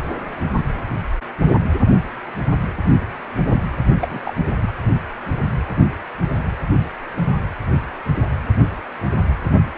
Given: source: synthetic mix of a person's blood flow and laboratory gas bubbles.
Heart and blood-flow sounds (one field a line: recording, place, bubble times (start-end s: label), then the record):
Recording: Doppler ultrasound of blood flow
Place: precordium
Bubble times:
4.00-4.20 s: bubbles
4.25-4.34 s: bubbles
4.61-4.72 s: bubbles
From the record:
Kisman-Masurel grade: 211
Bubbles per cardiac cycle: several, 3 to 8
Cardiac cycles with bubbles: 1 to 10%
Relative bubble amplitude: barely perceptible (0.100 to 0.250)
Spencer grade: 1 (occasional bubble signal discernible with the cardiac motion signal, with majority of cardiac periods free of bubbles)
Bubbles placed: anywhere in the cardiac cycle